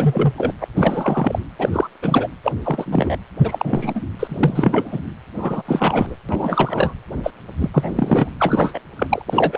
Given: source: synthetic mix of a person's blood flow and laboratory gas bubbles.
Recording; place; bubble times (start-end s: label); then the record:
Doppler ultrasound of blood flow; precordium
0.00-0.33 s: bubbles
0.37-0.53 s: bubbles
0.60-0.67 s: bubbles
0.76-1.39 s: bubbles
1.58-1.70 s: bubbles
1.72-1.87 s: bubbles
2.02-2.28 s: bubbles
2.43-2.54 s: bubbles
2.64-3.17 s: bubbles
3.38-4.02 s: bubbles
4.19-5.02 s: bubbles
5.38-5.62 s: bubbles
5.66-6.16 s: bubbles
6.29-6.93 s: bubbles
7.23-7.31 s: bubbles
7.58-7.70 s: bubbles
7.73-8.29 s: bubbles
8.39-8.79 s: bubbles
8.96-9.22 s: bubbles
9.28-9.57 s: bubbles
From the record:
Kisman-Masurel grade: 343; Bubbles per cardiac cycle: rolling drumbeat, 9 or more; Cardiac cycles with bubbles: 100%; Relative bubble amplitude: loud (0.450 to 0.775); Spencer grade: 3 (all of the cardiac periods contain showers or single bubble signals, but not dominating or overriding the cardiac motion signals); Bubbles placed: anywhere in the cardiac cycle